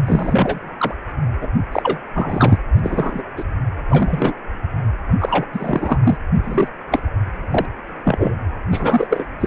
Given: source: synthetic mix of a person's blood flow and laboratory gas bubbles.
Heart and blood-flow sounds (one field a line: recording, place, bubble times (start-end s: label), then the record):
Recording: Doppler ultrasound of blood flow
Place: precordium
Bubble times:
0.06-0.70 s: bubbles
0.77-0.95 s: bubbles
1.41-1.49 s: bubbles
1.72-1.98 s: bubbles
2.13-2.57 s: bubbles
2.77-2.81 s: bubbles
2.83-3.24 s: bubbles
3.36-3.44 s: bubbles
3.90-4.33 s: bubbles
5.18-5.45 s: bubbles
5.53-5.97 s: bubbles
6.03-6.17 s: bubbles
6.43-6.68 s: bubbles
6.91-7.00 s: bubbles
7.50-7.66 s: bubbles
8.04-8.35 s: bubbles
8.71-9.27 s: bubbles
9.40-9.47 s: bubbles
From the record:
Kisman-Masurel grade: 243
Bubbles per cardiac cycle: several, 3 to 8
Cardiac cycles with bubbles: 100%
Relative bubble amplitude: loud (0.450 to 0.775)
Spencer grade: 3 (all of the cardiac periods contain showers or single bubble signals, but not dominating or overriding the cardiac motion signals)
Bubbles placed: anywhere in the cardiac cycle